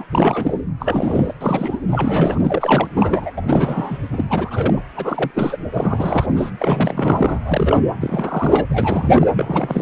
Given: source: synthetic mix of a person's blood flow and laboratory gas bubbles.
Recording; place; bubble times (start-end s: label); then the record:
Doppler ultrasound of blood flow; precordium
0.00-0.04 s: bubbles
0.11-0.60 s: bubbles
0.80-1.33 s: bubbles
1.40-1.78 s: bubbles
1.88-2.88 s: bubbles
2.96-3.30 s: bubbles
3.36-3.42 s: bubbles
3.48-3.98 s: bubbles
4.12-4.25 s: bubbles
4.29-4.80 s: bubbles
4.95-5.31 s: bubbles
5.34-5.56 s: bubbles
5.73-6.50 s: bubbles
6.59-7.40 s: bubbles
7.45-7.81 s: bubbles
8.01-8.66 s: bubbles
8.70-9.27 s: bubbles
9.36-9.82 s: bubbles
From the record:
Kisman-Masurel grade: 342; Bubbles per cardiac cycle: rolling drumbeat, 9 or more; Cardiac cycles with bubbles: 100%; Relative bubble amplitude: moderate (0.250 to 0.450); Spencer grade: 3 (all of the cardiac periods contain showers or single bubble signals, but not dominating or overriding the cardiac motion signals); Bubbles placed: anywhere in the cardiac cycle